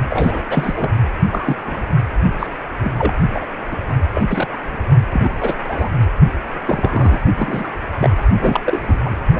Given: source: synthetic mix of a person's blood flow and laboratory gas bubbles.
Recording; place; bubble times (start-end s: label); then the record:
Doppler ultrasound of blood flow; precordium
0.10-0.43 s: bubbles
0.48-0.93 s: bubbles
1.31-1.55 s: bubbles
1.67-1.84 s: bubbles
2.39-2.47 s: bubbles
2.80-2.91 s: bubbles
2.98-3.13 s: bubbles
3.33-3.48 s: bubbles
3.71-3.77 s: bubbles
4.14-4.48 s: bubbles
5.11-5.30 s: bubbles
5.40-5.54 s: bubbles
5.64-5.89 s: bubbles
6.67-7.20 s: bubbles
7.35-7.68 s: bubbles
7.99-8.13 s: bubbles
8.40-8.60 s: bubbles
8.66-8.81 s: bubbles
8.87-8.97 s: bubbles
9.05-9.10 s: bubbles
9.33-9.40 s: bubbles
From the record:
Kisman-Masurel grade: 242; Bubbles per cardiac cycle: several, 3 to 8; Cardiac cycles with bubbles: 100%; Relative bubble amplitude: moderate (0.250 to 0.450); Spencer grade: 3 (all of the cardiac periods contain showers or single bubble signals, but not dominating or overriding the cardiac motion signals); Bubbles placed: only in the low amplitude regions of the cardiac cycle